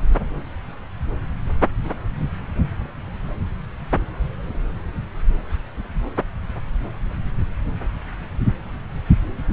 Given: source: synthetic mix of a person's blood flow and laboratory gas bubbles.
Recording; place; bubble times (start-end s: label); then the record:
Doppler ultrasound of blood flow; subclavian vein
no bubbles
From the record:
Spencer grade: 0 (complete lack of bubble signals)